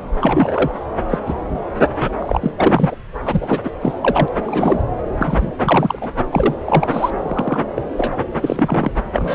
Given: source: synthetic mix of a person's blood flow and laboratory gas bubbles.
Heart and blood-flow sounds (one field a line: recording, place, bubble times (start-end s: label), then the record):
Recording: Doppler ultrasound of blood flow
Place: subclavian vein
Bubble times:
0.14-0.71 s: bubbles
1.09-1.18 s: bubbles
1.26-1.33 s: bubbles
1.99-2.10 s: bubbles
2.20-2.51 s: bubbles
2.57-2.95 s: bubbles
3.25-3.60 s: bubbles
3.64-3.71 s: bubbles
3.81-3.94 s: bubbles
4.01-4.29 s: bubbles
4.46-4.81 s: bubbles
5.09-5.52 s: bubbles
5.59-6.10 s: bubbles
6.31-6.57 s: bubbles
6.66-7.10 s: bubbles
7.23-7.63 s: bubbles
7.76-7.82 s: bubbles
7.96-8.13 s: bubbles
8.41-8.91 s: bubbles
9.12-9.35 s: bubbles
From the record:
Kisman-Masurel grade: 243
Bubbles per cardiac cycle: several, 3 to 8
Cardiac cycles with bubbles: 100%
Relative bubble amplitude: loud (0.450 to 0.775)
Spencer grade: 3 (all of the cardiac periods contain showers or single bubble signals, but not dominating or overriding the cardiac motion signals)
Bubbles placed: anywhere in the cardiac cycle